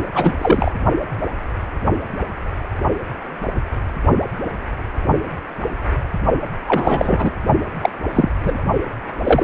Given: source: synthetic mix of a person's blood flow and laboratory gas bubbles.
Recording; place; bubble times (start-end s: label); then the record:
Doppler ultrasound of blood flow; precordium
0.15-0.32 s: bubbles
0.38-0.72 s: bubbles
6.67-7.32 s: bubbles
7.82-7.90 s: bubbles
8.13-8.28 s: bubbles
8.40-8.61 s: bubbles
9.23-9.44 s: bubbles
From the record:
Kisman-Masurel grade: 223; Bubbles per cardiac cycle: several, 3 to 8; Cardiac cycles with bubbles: 10 to 50%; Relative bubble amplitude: loud (0.450 to 0.775); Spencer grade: 2 (many but less than half of the cardiac periods contain bubble signals, singularly or in groups); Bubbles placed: only in the low amplitude regions of the cardiac cycle